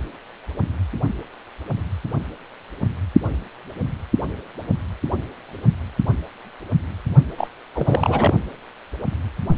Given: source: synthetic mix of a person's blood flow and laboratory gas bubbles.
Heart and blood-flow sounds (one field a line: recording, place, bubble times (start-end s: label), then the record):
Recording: Doppler ultrasound of blood flow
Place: precordium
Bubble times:
7.37-7.47 s: bubbles
7.75-8.34 s: bubbles
From the record:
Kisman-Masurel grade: 212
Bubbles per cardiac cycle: several, 3 to 8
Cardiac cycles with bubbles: 1 to 10%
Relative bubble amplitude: moderate (0.250 to 0.450)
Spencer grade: 1 (occasional bubble signal discernible with the cardiac motion signal, with majority of cardiac periods free of bubbles)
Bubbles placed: only in the low amplitude regions of the cardiac cycle